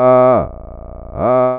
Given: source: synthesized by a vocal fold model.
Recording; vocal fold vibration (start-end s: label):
sustained vowel that changes in the middle
0.00-0.31 s: 127.4 Hz, open quotient 0.31
0.51-1.11 s: 28.3 Hz, open quotient 0.43
1.31-1.59 s: 127.4 Hz, open quotient 0.31